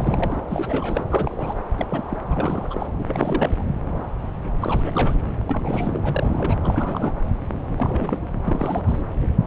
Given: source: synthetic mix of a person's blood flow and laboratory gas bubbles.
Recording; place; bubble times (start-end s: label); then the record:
Doppler ultrasound of blood flow; subclavian vein
0.00-0.41 s: bubbles
0.48-1.04 s: bubbles
1.10-1.54 s: bubbles
1.77-1.86 s: bubbles
1.90-2.17 s: bubbles
2.30-2.87 s: bubbles
2.99-3.04 s: bubbles
3.07-3.64 s: bubbles
4.61-5.21 s: bubbles
5.41-5.43 s: bubbles
5.47-6.58 s: bubbles
6.63-7.14 s: bubbles
7.77-8.18 s: bubbles
8.44-9.02 s: bubbles
From the record:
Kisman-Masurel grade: 332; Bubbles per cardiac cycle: rolling drumbeat, 9 or more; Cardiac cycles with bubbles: 50 to 99%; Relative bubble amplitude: moderate (0.250 to 0.450); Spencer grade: 3 (all of the cardiac periods contain showers or single bubble signals, but not dominating or overriding the cardiac motion signals); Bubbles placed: anywhere in the cardiac cycle